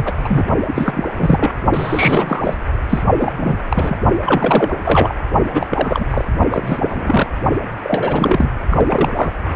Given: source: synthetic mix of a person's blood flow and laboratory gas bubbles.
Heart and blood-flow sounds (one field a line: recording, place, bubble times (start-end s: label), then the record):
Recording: Doppler ultrasound of blood flow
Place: precordium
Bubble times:
0.00-0.13 s: bubbles
0.24-0.44 s: bubbles
0.67-1.51 s: bubbles
1.73-2.56 s: bubbles
2.89-3.02 s: bubbles
3.18-3.33 s: bubbles
3.37-3.57 s: bubbles
3.69-3.96 s: bubbles
4.26-4.72 s: bubbles
4.85-5.13 s: bubbles
5.54-5.67 s: bubbles
5.70-6.07 s: bubbles
6.10-6.25 s: bubbles
6.50-7.30 s: bubbles
7.83-8.50 s: bubbles
8.71-9.32 s: bubbles
From the record:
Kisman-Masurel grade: 343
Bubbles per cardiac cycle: rolling drumbeat, 9 or more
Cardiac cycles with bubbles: 100%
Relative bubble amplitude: loud (0.450 to 0.775)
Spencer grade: 3 (all of the cardiac periods contain showers or single bubble signals, but not dominating or overriding the cardiac motion signals)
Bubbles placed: only in the low amplitude regions of the cardiac cycle